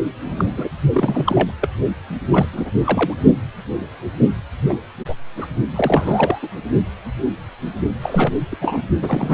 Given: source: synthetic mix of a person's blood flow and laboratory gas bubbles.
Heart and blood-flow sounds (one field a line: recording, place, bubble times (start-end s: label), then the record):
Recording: Doppler ultrasound of blood flow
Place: precordium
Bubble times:
0.27-0.70 s: bubbles
0.93-1.52 s: bubbles
1.61-1.69 s: bubbles
2.29-2.47 s: bubbles
2.52-2.71 s: bubbles
2.85-3.14 s: bubbles
4.68-4.77 s: bubbles
5.07-5.14 s: bubbles
5.38-5.46 s: bubbles
5.75-6.39 s: bubbles
6.42-6.48 s: bubbles
8.02-8.33 s: bubbles
8.51-8.55 s: bubbles
8.61-8.82 s: bubbles
9.01-9.34 s: bubbles
From the record:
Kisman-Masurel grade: 232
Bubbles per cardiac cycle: several, 3 to 8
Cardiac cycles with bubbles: 50 to 99%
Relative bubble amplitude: moderate (0.250 to 0.450)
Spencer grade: 3 (all of the cardiac periods contain showers or single bubble signals, but not dominating or overriding the cardiac motion signals)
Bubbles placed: only in the low amplitude regions of the cardiac cycle